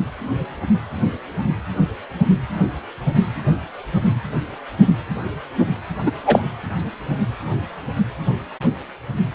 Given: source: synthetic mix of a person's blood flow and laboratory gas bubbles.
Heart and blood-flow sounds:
Doppler ultrasound of blood flow; precordium
6.06-6.12 s: bubbles
6.25-6.43 s: bubbles
From the record:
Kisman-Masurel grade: 213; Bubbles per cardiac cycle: several, 3 to 8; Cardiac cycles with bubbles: 1 to 10%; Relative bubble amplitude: loud (0.450 to 0.775); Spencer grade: 1 (occasional bubble signal discernible with the cardiac motion signal, with majority of cardiac periods free of bubbles); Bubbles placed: anywhere in the cardiac cycle

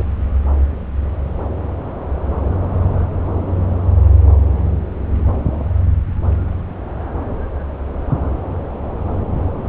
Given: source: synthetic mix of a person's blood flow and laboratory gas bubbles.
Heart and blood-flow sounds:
Doppler ultrasound of blood flow; subclavian vein
0.00-0.02 s: bubbles
From the record:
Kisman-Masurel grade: 113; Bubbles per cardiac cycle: 1 to 2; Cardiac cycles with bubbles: 1 to 10%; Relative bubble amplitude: loud (0.450 to 0.775); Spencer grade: 1 (occasional bubble signal discernible with the cardiac motion signal, with majority of cardiac periods free of bubbles); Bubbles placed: anywhere in the cardiac cycle

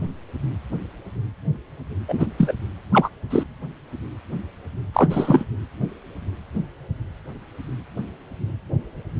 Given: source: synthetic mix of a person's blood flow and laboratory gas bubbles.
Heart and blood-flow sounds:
Doppler ultrasound of blood flow; precordium
2.08-2.26 s: bubbles
2.38-2.53 s: bubbles
2.92-3.09 s: bubbles
3.29-3.45 s: bubbles
4.93-5.44 s: bubbles
From the record:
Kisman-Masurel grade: 223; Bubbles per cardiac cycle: several, 3 to 8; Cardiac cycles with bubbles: 10 to 50%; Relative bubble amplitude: loud (0.450 to 0.775); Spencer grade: 2 (many but less than half of the cardiac periods contain bubble signals, singularly or in groups); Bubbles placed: anywhere in the cardiac cycle

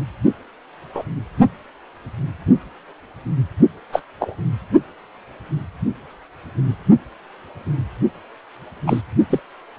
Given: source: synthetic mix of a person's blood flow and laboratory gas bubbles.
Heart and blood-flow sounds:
Doppler ultrasound of blood flow; precordium
0.94-1.03 s: bubbles
3.92-4.01 s: bubbles
4.20-4.35 s: bubbles
8.86-9.02 s: bubbles
9.30-9.40 s: bubbles
From the record:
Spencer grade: 2 (many but less than half of the cardiac periods contain bubble signals, singularly or in groups); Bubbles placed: only in the low amplitude regions of the cardiac cycle

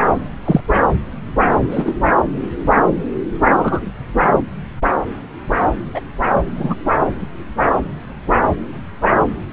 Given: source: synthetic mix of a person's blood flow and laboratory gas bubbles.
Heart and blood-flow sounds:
Doppler ultrasound of blood flow; subclavian vein
0.45-0.60 s: bubbles
1.71-1.95 s: bubbles
3.57-3.86 s: bubbles
5.94-6.00 s: bubbles
6.56-6.75 s: bubbles
From the record:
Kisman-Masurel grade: 123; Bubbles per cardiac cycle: 1 to 2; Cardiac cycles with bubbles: 10 to 50%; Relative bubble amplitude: loud (0.450 to 0.775); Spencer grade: 2 (many but less than half of the cardiac periods contain bubble signals, singularly or in groups); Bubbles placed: anywhere in the cardiac cycle

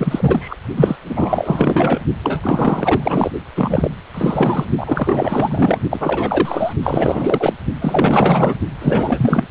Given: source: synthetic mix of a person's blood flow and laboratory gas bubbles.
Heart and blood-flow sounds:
Doppler ultrasound of blood flow; precordium
0.00-0.56 s: bubbles
0.76-0.96 s: bubbles
1.09-2.02 s: bubbles
2.22-3.31 s: bubbles
3.55-3.91 s: bubbles
4.14-4.65 s: bubbles
4.77-5.79 s: bubbles
5.90-6.73 s: bubbles
6.83-7.54 s: bubbles
7.81-8.57 s: bubbles
8.81-9.44 s: bubbles
From the record:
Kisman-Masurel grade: 444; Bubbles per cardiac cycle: continuous sound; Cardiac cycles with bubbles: 100%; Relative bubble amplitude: maximal (0.775 to 0.999); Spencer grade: 4 (maximum detectable bubble signal sounding continuously throughout systole and diastole of every cardiac period, and overriding the amplitude of the normal cardiac signals); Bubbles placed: only in the low amplitude regions of the cardiac cycle

